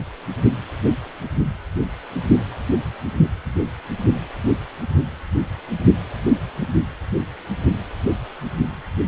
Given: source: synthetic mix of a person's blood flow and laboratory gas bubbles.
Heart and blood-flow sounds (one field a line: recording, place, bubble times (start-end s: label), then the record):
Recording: Doppler ultrasound of blood flow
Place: precordium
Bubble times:
no bubbles
From the record:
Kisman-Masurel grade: 000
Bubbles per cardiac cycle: 0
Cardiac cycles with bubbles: 0%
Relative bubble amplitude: no bubbles discernible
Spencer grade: 0 (complete lack of bubble signals)